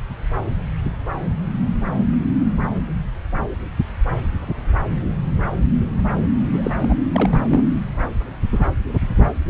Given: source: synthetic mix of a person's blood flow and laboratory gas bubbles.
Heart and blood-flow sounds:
Doppler ultrasound of blood flow; subclavian vein
6.51-6.76 s: bubbles
6.82-6.94 s: bubbles
7.12-7.64 s: bubbles
From the record:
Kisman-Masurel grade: 212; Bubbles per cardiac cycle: several, 3 to 8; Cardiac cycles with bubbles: 1 to 10%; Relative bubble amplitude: moderate (0.250 to 0.450); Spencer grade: 1 (occasional bubble signal discernible with the cardiac motion signal, with majority of cardiac periods free of bubbles); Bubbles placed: anywhere in the cardiac cycle

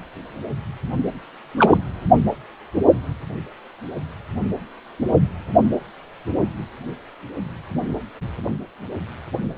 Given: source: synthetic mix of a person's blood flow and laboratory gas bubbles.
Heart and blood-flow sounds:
Doppler ultrasound of blood flow; precordium
1.57-1.77 s: bubbles
From the record:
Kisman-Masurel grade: 113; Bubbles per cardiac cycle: 1 to 2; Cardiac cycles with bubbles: 1 to 10%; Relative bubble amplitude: loud (0.450 to 0.775); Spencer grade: 1 (occasional bubble signal discernible with the cardiac motion signal, with majority of cardiac periods free of bubbles); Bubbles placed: only in the low amplitude regions of the cardiac cycle

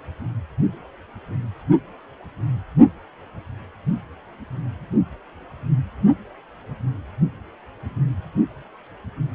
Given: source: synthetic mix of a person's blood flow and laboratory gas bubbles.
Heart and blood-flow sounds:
Doppler ultrasound of blood flow; precordium
no bubbles
From the record:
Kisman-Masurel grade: 000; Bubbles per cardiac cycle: 0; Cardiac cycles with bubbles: 0%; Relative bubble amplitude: no bubbles discernible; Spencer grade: 0 (complete lack of bubble signals)

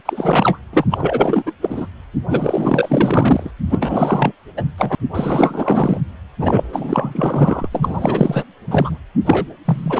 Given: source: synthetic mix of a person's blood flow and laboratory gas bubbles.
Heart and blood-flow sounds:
Doppler ultrasound of blood flow; precordium
0.05-0.58 s: bubbles
0.73-0.85 s: bubbles
0.90-1.44 s: bubbles
1.46-1.52 s: bubbles
1.60-1.86 s: bubbles
2.29-3.51 s: bubbles
3.69-4.32 s: bubbles
4.57-4.63 s: bubbles
4.78-4.95 s: bubbles
5.14-6.01 s: bubbles
6.38-7.67 s: bubbles
7.72-8.44 s: bubbles
8.67-8.98 s: bubbles
9.26-9.48 s: bubbles
9.65-10.00 s: bubbles
From the record:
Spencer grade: 4 (maximum detectable bubble signal sounding continuously throughout systole and diastole of every cardiac period, and overriding the amplitude of the normal cardiac signals); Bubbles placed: anywhere in the cardiac cycle

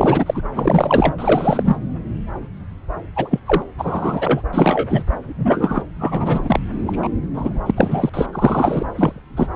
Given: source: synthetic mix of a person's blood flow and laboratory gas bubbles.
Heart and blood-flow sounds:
Doppler ultrasound of blood flow; subclavian vein
0.00-0.41 s: bubbles
0.55-1.15 s: bubbles
1.18-1.76 s: bubbles
3.15-3.40 s: bubbles
3.46-3.62 s: bubbles
3.77-4.42 s: bubbles
4.53-5.04 s: bubbles
5.23-5.83 s: bubbles
5.98-6.59 s: bubbles
6.86-7.08 s: bubbles
7.33-7.62 s: bubbles
7.66-7.71 s: bubbles
7.76-8.10 s: bubbles
8.13-8.27 s: bubbles
8.32-8.84 s: bubbles
8.97-9.20 s: bubbles
9.36-9.47 s: bubbles
From the record:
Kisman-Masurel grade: 233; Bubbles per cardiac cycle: several, 3 to 8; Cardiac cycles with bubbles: 50 to 99%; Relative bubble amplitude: loud (0.450 to 0.775); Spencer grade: 3 (all of the cardiac periods contain showers or single bubble signals, but not dominating or overriding the cardiac motion signals); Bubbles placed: anywhere in the cardiac cycle

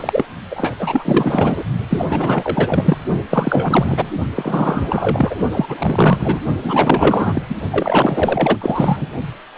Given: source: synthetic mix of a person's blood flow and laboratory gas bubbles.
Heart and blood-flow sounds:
Doppler ultrasound of blood flow; precordium
0.00-0.26 s: bubbles
0.51-0.74 s: bubbles
0.78-1.65 s: bubbles
1.89-2.06 s: bubbles
2.09-2.97 s: bubbles
3.30-4.10 s: bubbles
4.35-5.35 s: bubbles
5.51-6.39 s: bubbles
6.61-7.42 s: bubbles
7.48-7.56 s: bubbles
7.70-8.57 s: bubbles
8.61-9.09 s: bubbles
From the record:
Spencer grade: 4 (maximum detectable bubble signal sounding continuously throughout systole and diastole of every cardiac period, and overriding the amplitude of the normal cardiac signals); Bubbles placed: only in the low amplitude regions of the cardiac cycle

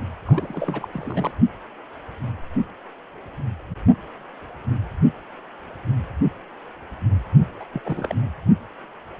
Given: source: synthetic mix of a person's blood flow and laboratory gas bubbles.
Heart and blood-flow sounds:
Doppler ultrasound of blood flow; precordium
0.25-0.89 s: bubbles
0.92-1.31 s: bubbles
7.60-7.64 s: bubbles
7.73-7.82 s: bubbles
7.84-8.15 s: bubbles
From the record:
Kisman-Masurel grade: 221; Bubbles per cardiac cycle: several, 3 to 8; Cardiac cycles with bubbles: 10 to 50%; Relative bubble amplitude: barely perceptible (0.100 to 0.250); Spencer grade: 2 (many but less than half of the cardiac periods contain bubble signals, singularly or in groups); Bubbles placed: only in the low amplitude regions of the cardiac cycle

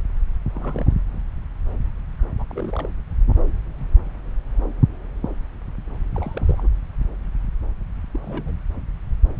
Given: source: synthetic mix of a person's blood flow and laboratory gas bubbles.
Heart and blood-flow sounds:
Doppler ultrasound of blood flow; subclavian vein
0.54-0.93 s: bubbles
2.37-2.44 s: bubbles
2.48-2.89 s: bubbles
6.14-6.68 s: bubbles
8.12-8.20 s: bubbles
8.22-8.53 s: bubbles
From the record:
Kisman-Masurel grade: 221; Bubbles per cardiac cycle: several, 3 to 8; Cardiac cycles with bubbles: 10 to 50%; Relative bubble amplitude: barely perceptible (0.100 to 0.250); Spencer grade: 2 (many but less than half of the cardiac periods contain bubble signals, singularly or in groups); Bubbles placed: anywhere in the cardiac cycle

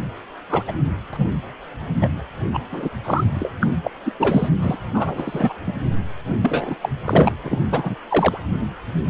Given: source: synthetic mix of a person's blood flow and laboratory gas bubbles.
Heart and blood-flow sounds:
Doppler ultrasound of blood flow; precordium
0.49-0.62 s: bubbles
0.68-0.72 s: bubbles
1.13-1.26 s: bubbles
2.00-2.08 s: bubbles
2.54-2.60 s: bubbles
2.72-2.89 s: bubbles
3.04-3.25 s: bubbles
3.35-3.48 s: bubbles
3.60-3.67 s: bubbles
3.84-3.91 s: bubbles
4.04-4.12 s: bubbles
4.19-4.49 s: bubbles
4.62-4.77 s: bubbles
4.94-5.53 s: bubbles
5.67-5.73 s: bubbles
6.42-6.75 s: bubbles
6.81-6.89 s: bubbles
7.04-7.36 s: bubbles
7.43-7.61 s: bubbles
7.71-7.96 s: bubbles
8.09-8.38 s: bubbles
From the record:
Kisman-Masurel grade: 242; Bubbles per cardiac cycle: several, 3 to 8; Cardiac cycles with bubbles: 100%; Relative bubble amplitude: moderate (0.250 to 0.450); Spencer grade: 3 (all of the cardiac periods contain showers or single bubble signals, but not dominating or overriding the cardiac motion signals); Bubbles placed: anywhere in the cardiac cycle

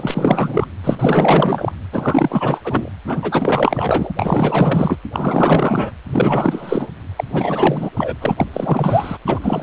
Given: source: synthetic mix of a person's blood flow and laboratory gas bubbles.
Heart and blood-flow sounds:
Doppler ultrasound of blood flow; precordium
0.00-0.67 s: bubbles
0.84-0.95 s: bubbles
0.99-1.72 s: bubbles
1.92-2.60 s: bubbles
2.63-2.90 s: bubbles
3.04-3.17 s: bubbles
3.21-4.12 s: bubbles
4.19-4.97 s: bubbles
5.13-5.91 s: bubbles
6.09-6.88 s: bubbles
7.16-7.24 s: bubbles
7.33-7.91 s: bubbles
7.96-8.16 s: bubbles
8.21-8.47 s: bubbles
8.53-9.18 s: bubbles
9.26-9.63 s: bubbles
From the record:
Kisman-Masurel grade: 444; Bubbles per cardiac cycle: continuous sound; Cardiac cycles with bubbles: 100%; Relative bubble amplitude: maximal (0.775 to 0.999); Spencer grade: 4 (maximum detectable bubble signal sounding continuously throughout systole and diastole of every cardiac period, and overriding the amplitude of the normal cardiac signals); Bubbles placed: anywhere in the cardiac cycle

